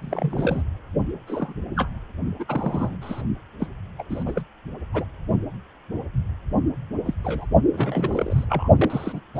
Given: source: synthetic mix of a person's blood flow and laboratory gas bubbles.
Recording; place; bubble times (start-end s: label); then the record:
Doppler ultrasound of blood flow; precordium
0.01-0.62 s: bubbles
1.27-1.53 s: bubbles
1.76-1.88 s: bubbles
2.39-2.46 s: bubbles
2.48-2.97 s: bubbles
3.01-3.22 s: bubbles
3.60-3.68 s: bubbles
3.98-4.03 s: bubbles
4.10-4.42 s: bubbles
4.94-5.04 s: bubbles
7.06-7.14 s: bubbles
7.24-7.46 s: bubbles
7.73-8.44 s: bubbles
8.48-8.69 s: bubbles
8.76-9.21 s: bubbles
9.34-9.40 s: bubbles
From the record:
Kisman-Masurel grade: 232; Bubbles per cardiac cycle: several, 3 to 8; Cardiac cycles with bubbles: 50 to 99%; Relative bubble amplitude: moderate (0.250 to 0.450); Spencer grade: 3 (all of the cardiac periods contain showers or single bubble signals, but not dominating or overriding the cardiac motion signals); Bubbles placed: only in the low amplitude regions of the cardiac cycle